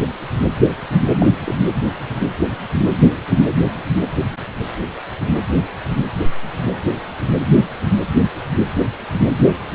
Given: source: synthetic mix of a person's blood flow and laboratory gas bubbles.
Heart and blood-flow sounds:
Doppler ultrasound of blood flow; precordium
1.19-1.27 s: bubbles
1.45-1.55 s: bubbles
From the record:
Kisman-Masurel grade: 112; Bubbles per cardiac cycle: 1 to 2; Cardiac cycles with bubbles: 1 to 10%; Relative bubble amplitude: moderate (0.250 to 0.450); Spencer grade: 1 (occasional bubble signal discernible with the cardiac motion signal, with majority of cardiac periods free of bubbles); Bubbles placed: anywhere in the cardiac cycle

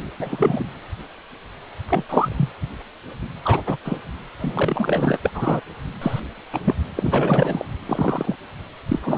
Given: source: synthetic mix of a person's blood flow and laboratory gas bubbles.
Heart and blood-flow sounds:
Doppler ultrasound of blood flow; precordium
0.20-0.64 s: bubbles
1.89-2.04 s: bubbles
2.09-2.49 s: bubbles
3.44-3.62 s: bubbles
3.67-3.77 s: bubbles
3.84-3.98 s: bubbles
4.39-5.17 s: bubbles
5.23-5.32 s: bubbles
5.34-5.61 s: bubbles
6.01-6.20 s: bubbles
6.52-6.61 s: bubbles
6.65-6.75 s: bubbles
6.95-7.65 s: bubbles
7.86-8.35 s: bubbles
8.88-8.99 s: bubbles
9.02-9.18 s: bubbles
From the record:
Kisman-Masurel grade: 233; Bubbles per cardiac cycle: several, 3 to 8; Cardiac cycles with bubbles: 50 to 99%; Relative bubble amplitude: loud (0.450 to 0.775); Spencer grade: 3 (all of the cardiac periods contain showers or single bubble signals, but not dominating or overriding the cardiac motion signals); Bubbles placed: anywhere in the cardiac cycle

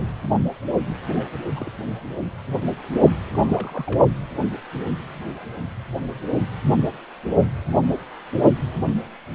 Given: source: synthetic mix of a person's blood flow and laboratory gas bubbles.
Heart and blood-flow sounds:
Doppler ultrasound of blood flow; precordium
1.06-1.35 s: bubbles
1.56-1.72 s: bubbles
3.27-3.29 s: bubbles
3.33-4.05 s: bubbles
From the record:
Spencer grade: 2 (many but less than half of the cardiac periods contain bubble signals, singularly or in groups); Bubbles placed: only in the low amplitude regions of the cardiac cycle

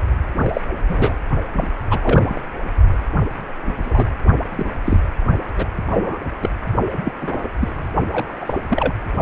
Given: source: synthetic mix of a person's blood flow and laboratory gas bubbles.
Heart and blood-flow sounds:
Doppler ultrasound of blood flow; precordium
0.35-0.50 s: bubbles
0.53-0.61 s: bubbles
0.89-1.14 s: bubbles
1.53-1.67 s: bubbles
1.90-2.00 s: bubbles
2.03-2.39 s: bubbles
3.65-3.75 s: bubbles
3.83-4.10 s: bubbles
4.56-4.71 s: bubbles
4.85-5.00 s: bubbles
5.58-5.65 s: bubbles
5.86-6.18 s: bubbles
6.42-6.50 s: bubbles
7.04-7.12 s: bubbles
7.21-7.49 s: bubbles
7.60-7.89 s: bubbles
8.12-8.58 s: bubbles
8.69-8.93 s: bubbles
From the record:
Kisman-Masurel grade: 242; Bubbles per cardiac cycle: several, 3 to 8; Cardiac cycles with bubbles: 100%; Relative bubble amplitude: moderate (0.250 to 0.450); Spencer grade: 3 (all of the cardiac periods contain showers or single bubble signals, but not dominating or overriding the cardiac motion signals); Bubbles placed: only in the low amplitude regions of the cardiac cycle

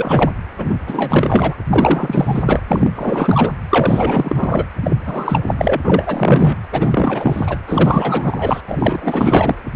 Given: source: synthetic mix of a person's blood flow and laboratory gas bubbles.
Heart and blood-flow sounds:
Doppler ultrasound of blood flow; precordium
0.00-0.31 s: bubbles
0.57-1.54 s: bubbles
1.70-2.60 s: bubbles
2.68-2.90 s: bubbles
2.96-3.50 s: bubbles
3.70-4.65 s: bubbles
4.82-4.97 s: bubbles
5.06-5.54 s: bubbles
5.58-5.82 s: bubbles
5.84-6.57 s: bubbles
6.72-7.58 s: bubbles
7.67-8.60 s: bubbles
8.66-9.55 s: bubbles
From the record:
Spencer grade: 4 (maximum detectable bubble signal sounding continuously throughout systole and diastole of every cardiac period, and overriding the amplitude of the normal cardiac signals); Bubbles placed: anywhere in the cardiac cycle

